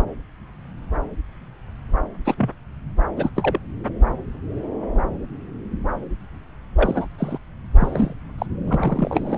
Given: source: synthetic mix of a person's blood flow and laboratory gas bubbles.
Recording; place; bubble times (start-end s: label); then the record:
Doppler ultrasound of blood flow; subclavian vein
2.25-2.35 s: bubbles
2.37-2.50 s: bubbles
3.16-3.31 s: bubbles
3.36-3.58 s: bubbles
6.75-7.07 s: bubbles
7.18-7.38 s: bubbles
7.80-8.14 s: bubbles
8.38-8.46 s: bubbles
8.65-9.38 s: bubbles
From the record:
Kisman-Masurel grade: 222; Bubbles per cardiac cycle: several, 3 to 8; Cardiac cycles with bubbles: 10 to 50%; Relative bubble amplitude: moderate (0.250 to 0.450); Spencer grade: 2 (many but less than half of the cardiac periods contain bubble signals, singularly or in groups); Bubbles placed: anywhere in the cardiac cycle